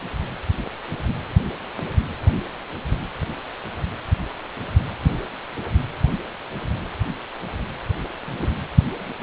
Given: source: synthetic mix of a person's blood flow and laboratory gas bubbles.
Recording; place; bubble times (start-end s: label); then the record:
Doppler ultrasound of blood flow; precordium
8.28-8.49 s: bubbles
8.99-9.12 s: bubbles
From the record:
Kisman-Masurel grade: 121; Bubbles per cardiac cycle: 1 to 2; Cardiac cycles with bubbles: 10 to 50%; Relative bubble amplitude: barely perceptible (0.100 to 0.250); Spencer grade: 2 (many but less than half of the cardiac periods contain bubble signals, singularly or in groups); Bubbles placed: anywhere in the cardiac cycle